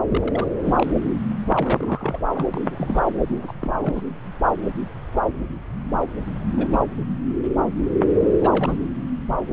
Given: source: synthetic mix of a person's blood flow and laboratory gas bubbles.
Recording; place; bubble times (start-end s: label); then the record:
Doppler ultrasound of blood flow; subclavian vein
0.07-0.48 s: bubbles
0.64-0.90 s: bubbles
1.53-2.27 s: bubbles
2.33-2.45 s: bubbles
2.54-2.61 s: bubbles
2.64-3.02 s: bubbles
3.06-3.10 s: bubbles
3.28-3.53 s: bubbles
3.60-4.04 s: bubbles
6.57-6.90 s: bubbles
8.42-8.77 s: bubbles
From the record:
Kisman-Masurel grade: 221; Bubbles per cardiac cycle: several, 3 to 8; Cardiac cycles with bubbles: 10 to 50%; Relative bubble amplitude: barely perceptible (0.100 to 0.250); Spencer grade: 2 (many but less than half of the cardiac periods contain bubble signals, singularly or in groups); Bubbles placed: anywhere in the cardiac cycle